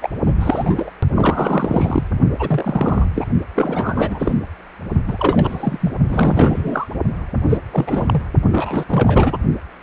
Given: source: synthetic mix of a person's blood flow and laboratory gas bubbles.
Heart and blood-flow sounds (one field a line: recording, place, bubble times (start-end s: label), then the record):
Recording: Doppler ultrasound of blood flow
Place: precordium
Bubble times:
0.02-0.10 s: bubbles
0.27-0.33 s: bubbles
0.40-0.90 s: bubbles
1.15-2.08 s: bubbles
2.38-3.08 s: bubbles
3.15-3.26 s: bubbles
3.55-4.35 s: bubbles
5.07-5.91 s: bubbles
6.08-6.87 s: bubbles
7.49-7.60 s: bubbles
7.71-8.22 s: bubbles
8.52-8.86 s: bubbles
8.89-9.37 s: bubbles
From the record:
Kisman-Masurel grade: 343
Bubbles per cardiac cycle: rolling drumbeat, 9 or more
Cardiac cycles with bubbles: 100%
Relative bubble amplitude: loud (0.450 to 0.775)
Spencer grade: 3 (all of the cardiac periods contain showers or single bubble signals, but not dominating or overriding the cardiac motion signals)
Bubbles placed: only in the low amplitude regions of the cardiac cycle